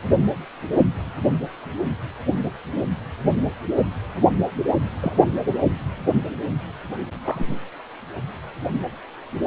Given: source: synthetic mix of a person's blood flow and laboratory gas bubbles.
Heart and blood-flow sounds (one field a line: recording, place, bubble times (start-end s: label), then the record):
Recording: Doppler ultrasound of blood flow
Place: precordium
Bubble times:
5.00-5.13 s: bubbles
7.25-7.55 s: bubbles
From the record:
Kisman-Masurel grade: 122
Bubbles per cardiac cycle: 1 to 2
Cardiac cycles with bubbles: 10 to 50%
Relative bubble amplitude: moderate (0.250 to 0.450)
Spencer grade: 2 (many but less than half of the cardiac periods contain bubble signals, singularly or in groups)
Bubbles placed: anywhere in the cardiac cycle